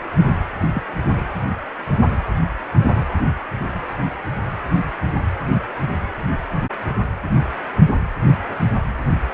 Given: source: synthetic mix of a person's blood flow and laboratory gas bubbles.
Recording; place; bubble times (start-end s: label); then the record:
Doppler ultrasound of blood flow; precordium
0.57-0.68 s: bubbles
0.73-0.82 s: bubbles
From the record:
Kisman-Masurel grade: 111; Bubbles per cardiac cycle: 1 to 2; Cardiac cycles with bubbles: 1 to 10%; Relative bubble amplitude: barely perceptible (0.100 to 0.250); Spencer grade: 1 (occasional bubble signal discernible with the cardiac motion signal, with majority of cardiac periods free of bubbles); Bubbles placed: anywhere in the cardiac cycle